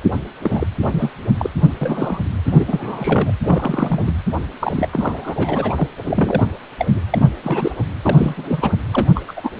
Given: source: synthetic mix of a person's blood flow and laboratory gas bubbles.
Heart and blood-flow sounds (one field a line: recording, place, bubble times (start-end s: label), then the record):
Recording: Doppler ultrasound of blood flow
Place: precordium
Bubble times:
0.43-0.67 s: bubbles
0.82-1.10 s: bubbles
1.38-1.50 s: bubbles
1.81-2.18 s: bubbles
2.46-2.65 s: bubbles
2.67-3.34 s: bubbles
3.40-4.16 s: bubbles
4.59-4.88 s: bubbles
4.92-5.74 s: bubbles
5.76-5.88 s: bubbles
6.04-6.47 s: bubbles
6.79-6.88 s: bubbles
6.91-7.00 s: bubbles
7.10-7.28 s: bubbles
7.43-7.71 s: bubbles
7.78-7.84 s: bubbles
8.02-8.73 s: bubbles
8.91-9.06 s: bubbles
9.14-9.21 s: bubbles
9.28-9.32 s: bubbles
9.36-9.51 s: bubbles
From the record:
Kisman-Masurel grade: 342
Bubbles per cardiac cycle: rolling drumbeat, 9 or more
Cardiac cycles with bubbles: 100%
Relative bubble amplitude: moderate (0.250 to 0.450)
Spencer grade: 3 (all of the cardiac periods contain showers or single bubble signals, but not dominating or overriding the cardiac motion signals)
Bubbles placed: anywhere in the cardiac cycle